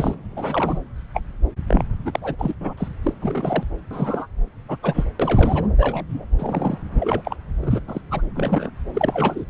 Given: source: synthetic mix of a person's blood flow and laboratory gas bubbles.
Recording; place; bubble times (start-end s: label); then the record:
Doppler ultrasound of blood flow; subclavian vein
0.00-0.14 s: bubbles
0.32-0.80 s: bubbles
1.14-1.21 s: bubbles
1.67-1.84 s: bubbles
2.05-2.36 s: bubbles
2.38-2.54 s: bubbles
2.60-2.74 s: bubbles
2.77-2.88 s: bubbles
3.03-3.13 s: bubbles
3.21-3.63 s: bubbles
3.91-4.27 s: bubbles
4.69-4.77 s: bubbles
4.83-5.04 s: bubbles
5.20-5.67 s: bubbles
5.78-6.06 s: bubbles
6.09-6.25 s: bubbles
6.38-6.78 s: bubbles
6.95-7.21 s: bubbles
7.25-7.36 s: bubbles
7.62-7.82 s: bubbles
7.88-8.01 s: bubbles
8.11-8.22 s: bubbles
8.35-8.71 s: bubbles
8.93-9.46 s: bubbles
From the record:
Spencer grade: 3 (all of the cardiac periods contain showers or single bubble signals, but not dominating or overriding the cardiac motion signals); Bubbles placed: anywhere in the cardiac cycle